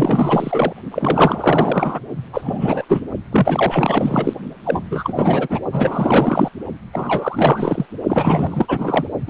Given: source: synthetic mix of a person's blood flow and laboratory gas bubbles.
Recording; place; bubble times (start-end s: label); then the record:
Doppler ultrasound of blood flow; precordium
0.00-0.73 s: bubbles
0.91-1.99 s: bubbles
2.33-2.85 s: bubbles
2.88-3.01 s: bubbles
3.31-4.34 s: bubbles
4.64-5.61 s: bubbles
5.72-6.49 s: bubbles
6.93-7.86 s: bubbles
8.08-9.07 s: bubbles
9.27-9.30 s: bubbles
From the record:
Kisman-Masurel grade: 444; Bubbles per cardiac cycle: continuous sound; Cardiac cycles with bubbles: 100%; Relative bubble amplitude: maximal (0.775 to 0.999); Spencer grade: 4 (maximum detectable bubble signal sounding continuously throughout systole and diastole of every cardiac period, and overriding the amplitude of the normal cardiac signals); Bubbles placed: only in the low amplitude regions of the cardiac cycle